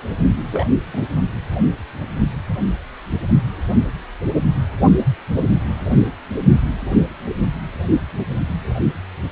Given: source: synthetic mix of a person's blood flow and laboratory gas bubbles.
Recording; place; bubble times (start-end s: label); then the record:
Doppler ultrasound of blood flow; precordium
0.51-0.67 s: bubbles
0.93-1.02 s: bubbles
From the record:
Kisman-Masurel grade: 112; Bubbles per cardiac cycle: 1 to 2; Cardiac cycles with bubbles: 1 to 10%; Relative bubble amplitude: moderate (0.250 to 0.450); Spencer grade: 1 (occasional bubble signal discernible with the cardiac motion signal, with majority of cardiac periods free of bubbles); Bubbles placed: anywhere in the cardiac cycle